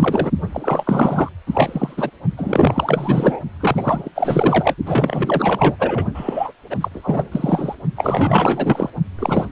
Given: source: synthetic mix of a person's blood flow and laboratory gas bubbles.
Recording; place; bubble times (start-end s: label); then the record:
Doppler ultrasound of blood flow; precordium
0.00-0.30 s: bubbles
0.52-1.29 s: bubbles
1.47-2.10 s: bubbles
2.37-3.40 s: bubbles
3.60-4.09 s: bubbles
4.15-4.75 s: bubbles
4.86-5.76 s: bubbles
5.79-6.07 s: bubbles
6.14-6.53 s: bubbles
6.70-6.76 s: bubbles
6.80-6.88 s: bubbles
6.94-7.75 s: bubbles
7.96-8.90 s: bubbles
9.19-9.46 s: bubbles
From the record:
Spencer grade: 4 (maximum detectable bubble signal sounding continuously throughout systole and diastole of every cardiac period, and overriding the amplitude of the normal cardiac signals); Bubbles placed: only in the low amplitude regions of the cardiac cycle